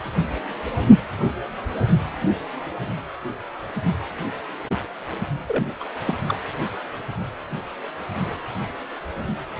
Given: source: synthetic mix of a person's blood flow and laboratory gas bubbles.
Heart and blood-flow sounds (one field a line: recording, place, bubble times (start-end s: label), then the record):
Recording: Doppler ultrasound of blood flow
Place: precordium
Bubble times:
5.48-5.73 s: bubbles
5.80-5.83 s: bubbles
6.04-6.16 s: bubbles
6.28-6.38 s: bubbles
From the record:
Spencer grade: 2 (many but less than half of the cardiac periods contain bubble signals, singularly or in groups)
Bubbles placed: only in the low amplitude regions of the cardiac cycle